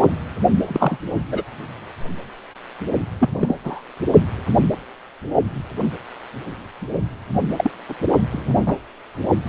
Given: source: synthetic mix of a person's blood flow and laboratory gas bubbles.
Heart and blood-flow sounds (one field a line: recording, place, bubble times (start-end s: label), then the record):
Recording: Doppler ultrasound of blood flow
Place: precordium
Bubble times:
0.65-0.97 s: bubbles
1.31-1.43 s: bubbles
3.20-3.29 s: bubbles
3.40-3.56 s: bubbles
3.64-3.81 s: bubbles
7.56-7.71 s: bubbles
7.88-7.94 s: bubbles
8.31-8.76 s: bubbles
9.46-9.49 s: bubbles
From the record:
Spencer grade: 3 (all of the cardiac periods contain showers or single bubble signals, but not dominating or overriding the cardiac motion signals)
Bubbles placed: only in the low amplitude regions of the cardiac cycle